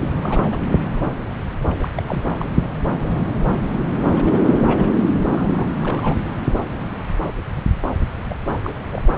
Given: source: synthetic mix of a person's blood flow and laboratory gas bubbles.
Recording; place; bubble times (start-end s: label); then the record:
Doppler ultrasound of blood flow; subclavian vein
0.01-0.08 s: bubbles
0.21-0.56 s: bubbles
1.66-1.89 s: bubbles
1.95-2.03 s: bubbles
2.08-2.21 s: bubbles
2.40-2.45 s: bubbles
4.17-4.40 s: bubbles
4.54-4.92 s: bubbles
5.17-5.24 s: bubbles
5.31-5.69 s: bubbles
5.75-6.17 s: bubbles
8.29-8.34 s: bubbles
8.47-8.59 s: bubbles
8.63-8.73 s: bubbles
8.92-9.02 s: bubbles
From the record:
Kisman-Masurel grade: 221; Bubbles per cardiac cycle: several, 3 to 8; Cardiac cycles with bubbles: 10 to 50%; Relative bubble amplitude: barely perceptible (0.100 to 0.250); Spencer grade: 2 (many but less than half of the cardiac periods contain bubble signals, singularly or in groups); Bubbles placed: anywhere in the cardiac cycle